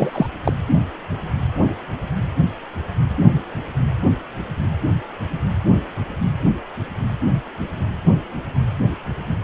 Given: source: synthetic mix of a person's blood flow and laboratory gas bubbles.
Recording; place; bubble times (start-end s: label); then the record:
Doppler ultrasound of blood flow; precordium
0.00-0.27 s: bubbles
0.44-0.52 s: bubbles
From the record:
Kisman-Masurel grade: 213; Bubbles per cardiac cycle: several, 3 to 8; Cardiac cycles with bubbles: 1 to 10%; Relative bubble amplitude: loud (0.450 to 0.775); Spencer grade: 1 (occasional bubble signal discernible with the cardiac motion signal, with majority of cardiac periods free of bubbles); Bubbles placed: anywhere in the cardiac cycle